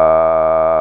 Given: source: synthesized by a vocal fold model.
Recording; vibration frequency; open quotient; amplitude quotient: sustained vowel; 80 Hz; 0.1; 1.1